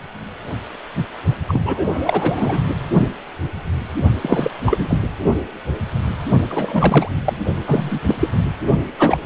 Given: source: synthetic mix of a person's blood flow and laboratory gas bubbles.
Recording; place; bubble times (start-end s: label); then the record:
Doppler ultrasound of blood flow; precordium
1.48-1.86 s: bubbles
1.92-2.62 s: bubbles
4.22-4.51 s: bubbles
4.66-5.01 s: bubbles
6.49-7.08 s: bubbles
7.25-7.37 s: bubbles
7.67-7.99 s: bubbles
8.05-8.15 s: bubbles
8.20-8.28 s: bubbles
8.32-8.44 s: bubbles
8.98-9.18 s: bubbles
9.23-9.26 s: bubbles
From the record:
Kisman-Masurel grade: 333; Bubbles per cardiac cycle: rolling drumbeat, 9 or more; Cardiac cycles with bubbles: 50 to 99%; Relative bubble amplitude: loud (0.450 to 0.775); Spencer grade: 3 (all of the cardiac periods contain showers or single bubble signals, but not dominating or overriding the cardiac motion signals); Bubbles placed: only in the low amplitude regions of the cardiac cycle